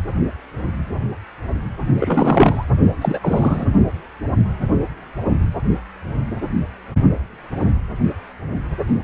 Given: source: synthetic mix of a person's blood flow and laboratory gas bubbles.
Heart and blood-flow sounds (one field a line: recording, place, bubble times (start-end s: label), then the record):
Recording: Doppler ultrasound of blood flow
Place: precordium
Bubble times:
1.99-2.65 s: bubbles
3.01-3.66 s: bubbles
From the record:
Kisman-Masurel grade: 222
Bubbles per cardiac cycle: several, 3 to 8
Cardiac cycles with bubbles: 10 to 50%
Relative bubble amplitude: moderate (0.250 to 0.450)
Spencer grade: 2 (many but less than half of the cardiac periods contain bubble signals, singularly or in groups)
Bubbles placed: only in the low amplitude regions of the cardiac cycle